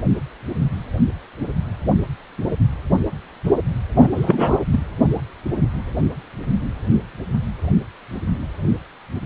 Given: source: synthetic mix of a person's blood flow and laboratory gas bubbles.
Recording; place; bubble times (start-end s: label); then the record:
Doppler ultrasound of blood flow; precordium
3.95-4.64 s: bubbles
4.71-4.79 s: bubbles
From the record:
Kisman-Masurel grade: 213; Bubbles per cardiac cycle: several, 3 to 8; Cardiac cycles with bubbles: 1 to 10%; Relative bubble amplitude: loud (0.450 to 0.775); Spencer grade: 1 (occasional bubble signal discernible with the cardiac motion signal, with majority of cardiac periods free of bubbles); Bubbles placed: anywhere in the cardiac cycle